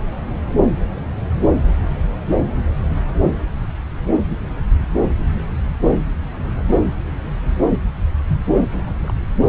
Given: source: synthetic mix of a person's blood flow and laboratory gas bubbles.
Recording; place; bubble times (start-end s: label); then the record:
Doppler ultrasound of blood flow; subclavian vein
8.52-8.94 s: bubbles
9.00-9.13 s: bubbles
From the record:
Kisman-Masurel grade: 211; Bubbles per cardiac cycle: several, 3 to 8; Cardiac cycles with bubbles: 1 to 10%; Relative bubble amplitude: barely perceptible (0.100 to 0.250); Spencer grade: 1 (occasional bubble signal discernible with the cardiac motion signal, with majority of cardiac periods free of bubbles); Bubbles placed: anywhere in the cardiac cycle